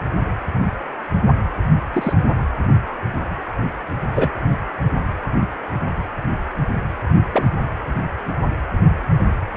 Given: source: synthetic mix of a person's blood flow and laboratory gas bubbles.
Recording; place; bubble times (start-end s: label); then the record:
Doppler ultrasound of blood flow; precordium
1.93-2.13 s: bubbles
2.87-2.92 s: bubbles
4.14-4.30 s: bubbles
7.32-7.53 s: bubbles
From the record:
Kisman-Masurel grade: 122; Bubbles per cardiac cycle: 1 to 2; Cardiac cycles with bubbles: 10 to 50%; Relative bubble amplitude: moderate (0.250 to 0.450); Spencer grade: 2 (many but less than half of the cardiac periods contain bubble signals, singularly or in groups); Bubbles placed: anywhere in the cardiac cycle